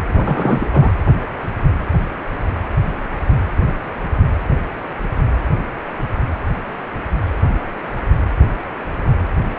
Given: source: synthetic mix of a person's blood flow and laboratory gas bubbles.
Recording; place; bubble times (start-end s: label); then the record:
Doppler ultrasound of blood flow; precordium
0.07-0.92 s: bubbles
From the record:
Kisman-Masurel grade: 212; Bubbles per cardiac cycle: several, 3 to 8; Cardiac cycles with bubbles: 1 to 10%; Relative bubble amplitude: moderate (0.250 to 0.450); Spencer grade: 1 (occasional bubble signal discernible with the cardiac motion signal, with majority of cardiac periods free of bubbles); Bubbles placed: anywhere in the cardiac cycle